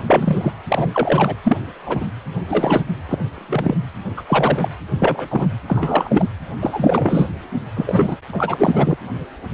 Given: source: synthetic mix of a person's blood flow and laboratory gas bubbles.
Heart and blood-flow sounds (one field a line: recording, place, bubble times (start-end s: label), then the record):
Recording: Doppler ultrasound of blood flow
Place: precordium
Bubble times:
0.07-0.52 s: bubbles
0.69-1.35 s: bubbles
1.43-1.57 s: bubbles
1.86-2.05 s: bubbles
2.48-2.83 s: bubbles
3.09-3.18 s: bubbles
3.35-3.75 s: bubbles
4.17-4.22 s: bubbles
4.26-4.68 s: bubbles
4.99-5.48 s: bubbles
5.68-6.29 s: bubbles
6.60-7.30 s: bubbles
7.76-8.16 s: bubbles
8.33-8.97 s: bubbles
From the record:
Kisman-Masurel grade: 243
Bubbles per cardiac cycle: several, 3 to 8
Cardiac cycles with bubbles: 100%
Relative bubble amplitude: loud (0.450 to 0.775)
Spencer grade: 3 (all of the cardiac periods contain showers or single bubble signals, but not dominating or overriding the cardiac motion signals)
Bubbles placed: anywhere in the cardiac cycle